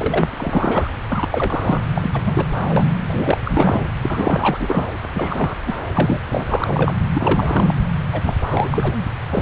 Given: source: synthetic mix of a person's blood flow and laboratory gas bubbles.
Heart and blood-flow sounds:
Doppler ultrasound of blood flow; subclavian vein
0.00-0.29 s: bubbles
0.36-0.90 s: bubbles
1.11-1.81 s: bubbles
1.94-2.10 s: bubbles
2.13-2.22 s: bubbles
2.24-2.46 s: bubbles
2.69-2.90 s: bubbles
3.07-3.38 s: bubbles
3.44-3.80 s: bubbles
4.03-4.88 s: bubbles
5.14-5.56 s: bubbles
5.66-5.73 s: bubbles
5.92-6.17 s: bubbles
6.24-6.97 s: bubbles
7.14-7.75 s: bubbles
8.12-8.33 s: bubbles
8.48-8.96 s: bubbles
9.30-9.42 s: bubbles
From the record:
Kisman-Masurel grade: 343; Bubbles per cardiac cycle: rolling drumbeat, 9 or more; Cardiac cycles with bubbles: 100%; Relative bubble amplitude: loud (0.450 to 0.775); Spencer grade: 3 (all of the cardiac periods contain showers or single bubble signals, but not dominating or overriding the cardiac motion signals); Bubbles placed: anywhere in the cardiac cycle

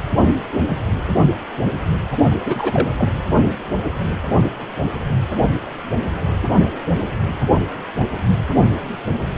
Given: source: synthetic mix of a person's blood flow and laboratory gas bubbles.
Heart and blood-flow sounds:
Doppler ultrasound of blood flow; precordium
2.31-2.38 s: bubbles
2.44-2.90 s: bubbles
2.98-3.09 s: bubbles
From the record:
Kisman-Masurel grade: 212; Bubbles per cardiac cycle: several, 3 to 8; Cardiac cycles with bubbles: 1 to 10%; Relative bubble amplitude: moderate (0.250 to 0.450); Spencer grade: 1 (occasional bubble signal discernible with the cardiac motion signal, with majority of cardiac periods free of bubbles); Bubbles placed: anywhere in the cardiac cycle

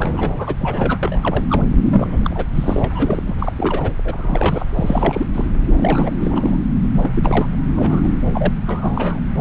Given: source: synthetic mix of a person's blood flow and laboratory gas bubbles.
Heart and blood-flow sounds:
Doppler ultrasound of blood flow; subclavian vein
0.00-0.34 s: bubbles
0.38-0.54 s: bubbles
0.59-0.98 s: bubbles
1.02-1.45 s: bubbles
1.49-1.63 s: bubbles
1.83-2.46 s: bubbles
2.55-3.23 s: bubbles
3.27-3.35 s: bubbles
3.38-3.52 s: bubbles
3.56-3.92 s: bubbles
4.04-4.66 s: bubbles
4.75-5.25 s: bubbles
5.34-5.45 s: bubbles
5.77-6.10 s: bubbles
6.21-6.59 s: bubbles
6.92-7.10 s: bubbles
7.14-7.58 s: bubbles
7.75-8.10 s: bubbles
8.20-8.27 s: bubbles
8.29-8.53 s: bubbles
8.67-9.19 s: bubbles
From the record:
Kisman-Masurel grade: 342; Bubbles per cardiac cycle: rolling drumbeat, 9 or more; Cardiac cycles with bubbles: 100%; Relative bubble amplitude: moderate (0.250 to 0.450); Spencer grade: 3 (all of the cardiac periods contain showers or single bubble signals, but not dominating or overriding the cardiac motion signals); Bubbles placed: anywhere in the cardiac cycle

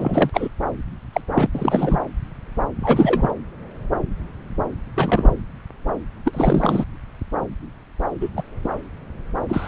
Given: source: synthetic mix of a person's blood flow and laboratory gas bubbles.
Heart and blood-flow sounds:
Doppler ultrasound of blood flow; subclavian vein
0.00-0.30 s: bubbles
0.33-0.48 s: bubbles
1.12-1.21 s: bubbles
1.28-1.47 s: bubbles
1.54-2.00 s: bubbles
2.81-3.31 s: bubbles
4.94-5.30 s: bubbles
6.25-6.85 s: bubbles
8.21-8.29 s: bubbles
8.36-8.42 s: bubbles
8.64-8.69 s: bubbles
9.48-9.68 s: bubbles
From the record:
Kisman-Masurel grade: 232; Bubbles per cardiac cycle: several, 3 to 8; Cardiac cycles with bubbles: 50 to 99%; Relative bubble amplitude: moderate (0.250 to 0.450); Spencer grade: 3 (all of the cardiac periods contain showers or single bubble signals, but not dominating or overriding the cardiac motion signals); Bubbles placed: anywhere in the cardiac cycle

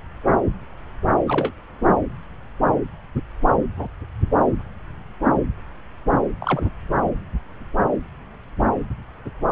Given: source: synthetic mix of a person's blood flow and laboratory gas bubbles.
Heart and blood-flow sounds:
Doppler ultrasound of blood flow; subclavian vein
1.25-1.52 s: bubbles
3.76-3.87 s: bubbles
6.40-6.70 s: bubbles
From the record:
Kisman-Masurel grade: 122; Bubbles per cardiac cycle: 1 to 2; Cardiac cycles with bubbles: 10 to 50%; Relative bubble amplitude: moderate (0.250 to 0.450); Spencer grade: 2 (many but less than half of the cardiac periods contain bubble signals, singularly or in groups); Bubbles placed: anywhere in the cardiac cycle

